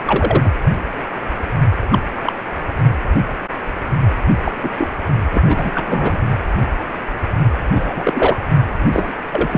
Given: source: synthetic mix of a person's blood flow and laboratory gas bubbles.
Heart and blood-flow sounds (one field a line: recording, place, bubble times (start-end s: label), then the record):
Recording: Doppler ultrasound of blood flow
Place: precordium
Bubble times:
0.06-0.52 s: bubbles
1.92-1.99 s: bubbles
2.17-2.33 s: bubbles
4.45-4.51 s: bubbles
4.62-4.70 s: bubbles
4.77-4.88 s: bubbles
5.32-5.42 s: bubbles
5.46-6.17 s: bubbles
7.74-8.38 s: bubbles
8.92-9.14 s: bubbles
9.32-9.58 s: bubbles
From the record:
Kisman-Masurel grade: 233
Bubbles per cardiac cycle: several, 3 to 8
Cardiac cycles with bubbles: 50 to 99%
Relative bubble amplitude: loud (0.450 to 0.775)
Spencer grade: 3 (all of the cardiac periods contain showers or single bubble signals, but not dominating or overriding the cardiac motion signals)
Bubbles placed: anywhere in the cardiac cycle